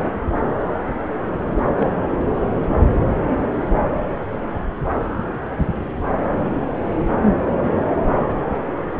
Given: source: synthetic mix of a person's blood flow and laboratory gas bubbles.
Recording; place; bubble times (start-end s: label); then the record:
Doppler ultrasound of blood flow; subclavian vein
1.56-1.65 s: bubbles
1.77-1.89 s: bubbles
From the record:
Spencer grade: 1 (occasional bubble signal discernible with the cardiac motion signal, with majority of cardiac periods free of bubbles); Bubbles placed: anywhere in the cardiac cycle